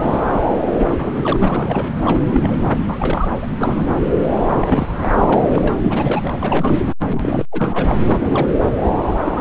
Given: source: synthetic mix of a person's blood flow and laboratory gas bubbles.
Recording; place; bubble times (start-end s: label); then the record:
Doppler ultrasound of blood flow; subclavian vein
0.00-0.31 s: bubbles
0.60-1.37 s: bubbles
1.40-1.96 s: bubbles
2.04-2.61 s: bubbles
2.88-3.35 s: bubbles
3.42-3.47 s: bubbles
3.60-3.89 s: bubbles
4.40-4.89 s: bubbles
4.97-5.10 s: bubbles
5.14-5.76 s: bubbles
5.82-6.33 s: bubbles
6.40-6.82 s: bubbles
7.10-7.45 s: bubbles
7.52-8.58 s: bubbles
8.83-8.90 s: bubbles
9.25-9.41 s: bubbles
From the record:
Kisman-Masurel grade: 332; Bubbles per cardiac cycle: rolling drumbeat, 9 or more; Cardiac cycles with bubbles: 50 to 99%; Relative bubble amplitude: moderate (0.250 to 0.450); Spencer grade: 3 (all of the cardiac periods contain showers or single bubble signals, but not dominating or overriding the cardiac motion signals); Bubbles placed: anywhere in the cardiac cycle